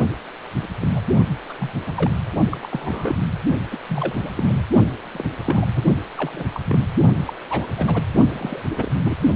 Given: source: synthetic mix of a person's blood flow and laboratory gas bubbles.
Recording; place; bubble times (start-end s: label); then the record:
Doppler ultrasound of blood flow; precordium
0.62-0.68 s: bubbles
0.81-1.02 s: bubbles
1.49-1.53 s: bubbles
1.59-1.70 s: bubbles
1.86-1.92 s: bubbles
1.95-2.11 s: bubbles
2.50-2.58 s: bubbles
2.62-3.15 s: bubbles
3.71-3.78 s: bubbles
3.89-4.61 s: bubbles
5.13-5.24 s: bubbles
5.45-5.67 s: bubbles
5.75-5.83 s: bubbles
6.17-6.46 s: bubbles
6.50-6.60 s: bubbles
6.64-6.79 s: bubbles
7.27-7.33 s: bubbles
7.50-7.67 s: bubbles
7.77-8.04 s: bubbles
8.32-8.63 s: bubbles
8.69-8.91 s: bubbles
9.04-9.15 s: bubbles
From the record:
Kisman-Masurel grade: 242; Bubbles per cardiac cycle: several, 3 to 8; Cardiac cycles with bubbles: 100%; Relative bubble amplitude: moderate (0.250 to 0.450); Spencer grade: 3 (all of the cardiac periods contain showers or single bubble signals, but not dominating or overriding the cardiac motion signals); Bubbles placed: only in the low amplitude regions of the cardiac cycle